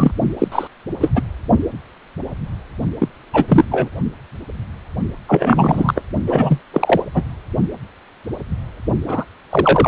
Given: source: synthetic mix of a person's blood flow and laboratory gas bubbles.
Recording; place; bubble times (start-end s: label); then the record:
Doppler ultrasound of blood flow; precordium
0.00-0.11 s: bubbles
0.39-0.48 s: bubbles
0.51-0.68 s: bubbles
1.00-1.12 s: bubbles
1.15-1.21 s: bubbles
2.99-3.08 s: bubbles
3.33-3.45 s: bubbles
3.48-3.65 s: bubbles
3.71-3.88 s: bubbles
5.28-6.02 s: bubbles
6.27-6.61 s: bubbles
6.73-7.04 s: bubbles
7.14-7.23 s: bubbles
9.07-9.25 s: bubbles
9.49-9.88 s: bubbles
From the record:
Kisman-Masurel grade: 233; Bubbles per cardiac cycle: several, 3 to 8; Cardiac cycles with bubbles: 50 to 99%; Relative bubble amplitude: loud (0.450 to 0.775); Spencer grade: 3 (all of the cardiac periods contain showers or single bubble signals, but not dominating or overriding the cardiac motion signals); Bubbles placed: only in the low amplitude regions of the cardiac cycle